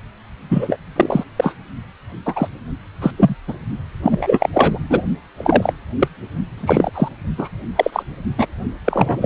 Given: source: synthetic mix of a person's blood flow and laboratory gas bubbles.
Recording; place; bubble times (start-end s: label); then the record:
Doppler ultrasound of blood flow; precordium
0.48-0.78 s: bubbles
0.96-1.24 s: bubbles
1.36-1.55 s: bubbles
2.25-2.47 s: bubbles
3.01-3.11 s: bubbles
3.17-3.36 s: bubbles
3.47-3.54 s: bubbles
4.03-4.50 s: bubbles
4.54-4.79 s: bubbles
4.90-5.02 s: bubbles
5.38-5.73 s: bubbles
5.99-6.08 s: bubbles
6.57-6.90 s: bubbles
6.94-7.08 s: bubbles
7.38-7.49 s: bubbles
7.75-8.03 s: bubbles
8.38-8.46 s: bubbles
8.84-9.26 s: bubbles
From the record:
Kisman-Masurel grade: 243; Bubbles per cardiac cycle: several, 3 to 8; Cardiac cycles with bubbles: 100%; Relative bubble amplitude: loud (0.450 to 0.775); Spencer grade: 3 (all of the cardiac periods contain showers or single bubble signals, but not dominating or overriding the cardiac motion signals); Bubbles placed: only in the low amplitude regions of the cardiac cycle